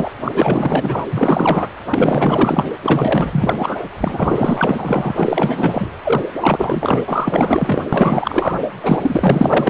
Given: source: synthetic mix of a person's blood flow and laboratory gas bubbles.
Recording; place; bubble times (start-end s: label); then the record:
Doppler ultrasound of blood flow; precordium
0.00-0.11 s: bubbles
0.23-1.06 s: bubbles
1.09-1.68 s: bubbles
1.90-2.64 s: bubbles
2.83-3.77 s: bubbles
4.00-5.91 s: bubbles
6.04-6.25 s: bubbles
6.41-7.02 s: bubbles
7.08-7.82 s: bubbles
7.93-8.55 s: bubbles
8.82-9.70 s: bubbles
From the record:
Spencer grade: 4 (maximum detectable bubble signal sounding continuously throughout systole and diastole of every cardiac period, and overriding the amplitude of the normal cardiac signals); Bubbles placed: anywhere in the cardiac cycle